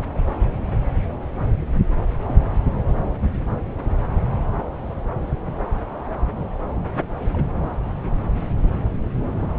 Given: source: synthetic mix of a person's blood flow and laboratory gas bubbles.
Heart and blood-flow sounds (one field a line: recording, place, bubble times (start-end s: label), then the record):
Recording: Doppler ultrasound of blood flow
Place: subclavian vein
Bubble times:
2.27-2.42 s: bubbles
7.32-7.46 s: bubbles
From the record:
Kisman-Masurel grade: 121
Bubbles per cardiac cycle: 1 to 2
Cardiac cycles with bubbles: 10 to 50%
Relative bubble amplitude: barely perceptible (0.100 to 0.250)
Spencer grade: 2 (many but less than half of the cardiac periods contain bubble signals, singularly or in groups)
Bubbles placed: anywhere in the cardiac cycle